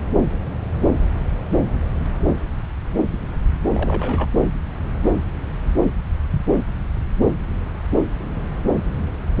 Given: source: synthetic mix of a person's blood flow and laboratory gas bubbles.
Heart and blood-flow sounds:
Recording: Doppler ultrasound of blood flow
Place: subclavian vein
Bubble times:
3.73-4.28 s: bubbles
From the record:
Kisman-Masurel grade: 211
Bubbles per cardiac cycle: several, 3 to 8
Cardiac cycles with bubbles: 1 to 10%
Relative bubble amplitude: barely perceptible (0.100 to 0.250)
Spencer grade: 1 (occasional bubble signal discernible with the cardiac motion signal, with majority of cardiac periods free of bubbles)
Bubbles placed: anywhere in the cardiac cycle

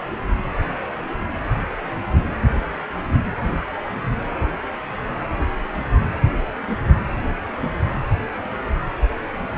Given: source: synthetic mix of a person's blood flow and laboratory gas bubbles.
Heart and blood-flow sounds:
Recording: Doppler ultrasound of blood flow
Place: precordium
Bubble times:
no bubbles
From the record:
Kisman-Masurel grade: 000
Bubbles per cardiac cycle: 0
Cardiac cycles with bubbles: 0%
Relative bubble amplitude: no bubbles discernible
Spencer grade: 0 (complete lack of bubble signals)

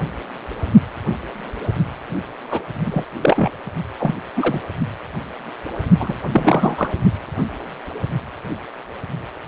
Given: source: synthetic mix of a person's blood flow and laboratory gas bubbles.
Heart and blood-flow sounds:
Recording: Doppler ultrasound of blood flow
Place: precordium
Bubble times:
2.50-2.62 s: bubbles
2.81-3.04 s: bubbles
3.21-3.51 s: bubbles
3.98-4.14 s: bubbles
4.37-4.60 s: bubbles
6.00-6.14 s: bubbles
6.31-6.93 s: bubbles
From the record:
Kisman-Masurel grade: 223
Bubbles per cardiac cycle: several, 3 to 8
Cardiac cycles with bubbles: 10 to 50%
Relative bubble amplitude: loud (0.450 to 0.775)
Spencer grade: 2 (many but less than half of the cardiac periods contain bubble signals, singularly or in groups)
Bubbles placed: only in the low amplitude regions of the cardiac cycle

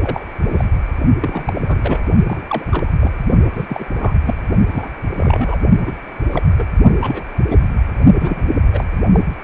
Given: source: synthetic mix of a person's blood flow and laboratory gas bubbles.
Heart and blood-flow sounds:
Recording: Doppler ultrasound of blood flow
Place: precordium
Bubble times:
0.03-0.29 s: bubbles
0.43-0.65 s: bubbles
1.20-2.00 s: bubbles
2.27-2.65 s: bubbles
2.69-2.92 s: bubbles
3.00-3.11 s: bubbles
3.53-3.66 s: bubbles
3.69-3.85 s: bubbles
3.99-4.14 s: bubbles
4.25-4.34 s: bubbles
4.70-4.91 s: bubbles
5.18-5.58 s: bubbles
5.86-5.93 s: bubbles
6.31-6.43 s: bubbles
6.58-6.65 s: bubbles
7.01-7.23 s: bubbles
7.49-7.58 s: bubbles
7.61-7.68 s: bubbles
8.20-8.53 s: bubbles
8.74-8.84 s: bubbles
9.12-9.20 s: bubbles
From the record:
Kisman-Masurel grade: 242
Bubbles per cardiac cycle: several, 3 to 8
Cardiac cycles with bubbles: 100%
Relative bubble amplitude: moderate (0.250 to 0.450)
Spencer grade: 3 (all of the cardiac periods contain showers or single bubble signals, but not dominating or overriding the cardiac motion signals)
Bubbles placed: only in the low amplitude regions of the cardiac cycle

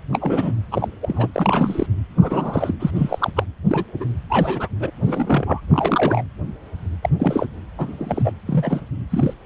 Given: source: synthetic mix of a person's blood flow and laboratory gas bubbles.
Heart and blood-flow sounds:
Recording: Doppler ultrasound of blood flow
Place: precordium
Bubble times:
0.12-0.55 s: bubbles
0.71-0.88 s: bubbles
1.02-1.27 s: bubbles
1.33-1.87 s: bubbles
2.17-2.75 s: bubbles
2.79-2.91 s: bubbles
2.94-3.30 s: bubbles
3.35-3.44 s: bubbles
3.65-3.84 s: bubbles
4.00-4.05 s: bubbles
4.29-4.68 s: bubbles
4.80-4.91 s: bubbles
5.04-5.61 s: bubbles
5.71-6.24 s: bubbles
7.03-7.09 s: bubbles
7.18-7.46 s: bubbles
7.77-8.32 s: bubbles
8.46-8.80 s: bubbles
9.10-9.34 s: bubbles
From the record:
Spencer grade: 3 (all of the cardiac periods contain showers or single bubble signals, but not dominating or overriding the cardiac motion signals)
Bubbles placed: anywhere in the cardiac cycle

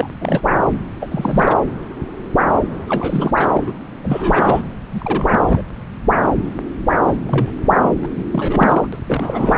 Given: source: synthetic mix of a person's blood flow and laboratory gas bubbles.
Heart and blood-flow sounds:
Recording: Doppler ultrasound of blood flow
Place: subclavian vein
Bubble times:
0.00-0.10 s: bubbles
0.20-0.78 s: bubbles
1.00-1.08 s: bubbles
1.10-1.57 s: bubbles
2.88-3.32 s: bubbles
3.35-3.72 s: bubbles
4.03-4.62 s: bubbles
4.92-5.62 s: bubbles
6.99-7.17 s: bubbles
7.27-7.55 s: bubbles
7.61-7.75 s: bubbles
7.82-7.91 s: bubbles
8.02-8.09 s: bubbles
8.17-8.24 s: bubbles
8.32-8.88 s: bubbles
8.92-8.99 s: bubbles
9.07-9.57 s: bubbles
From the record:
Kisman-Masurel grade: 332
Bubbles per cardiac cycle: rolling drumbeat, 9 or more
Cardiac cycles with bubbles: 50 to 99%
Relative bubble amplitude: moderate (0.250 to 0.450)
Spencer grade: 3 (all of the cardiac periods contain showers or single bubble signals, but not dominating or overriding the cardiac motion signals)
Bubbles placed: anywhere in the cardiac cycle

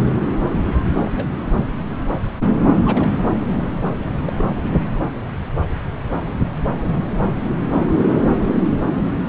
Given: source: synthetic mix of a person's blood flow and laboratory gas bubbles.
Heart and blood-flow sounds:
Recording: Doppler ultrasound of blood flow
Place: subclavian vein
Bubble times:
1.02-1.11 s: bubbles
1.14-1.25 s: bubbles
1.57-1.64 s: bubbles
2.85-3.11 s: bubbles
4.26-4.33 s: bubbles
4.35-4.45 s: bubbles
From the record:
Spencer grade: 2 (many but less than half of the cardiac periods contain bubble signals, singularly or in groups)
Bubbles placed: anywhere in the cardiac cycle

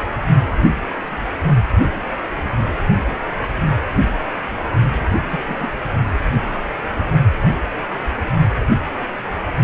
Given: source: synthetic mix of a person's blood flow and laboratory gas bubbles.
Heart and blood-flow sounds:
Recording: Doppler ultrasound of blood flow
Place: precordium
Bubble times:
5.00-5.21 s: bubbles
5.30-5.40 s: bubbles
5.47-5.55 s: bubbles
5.59-5.72 s: bubbles
From the record:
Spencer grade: 1 (occasional bubble signal discernible with the cardiac motion signal, with majority of cardiac periods free of bubbles)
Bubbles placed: only in the low amplitude regions of the cardiac cycle

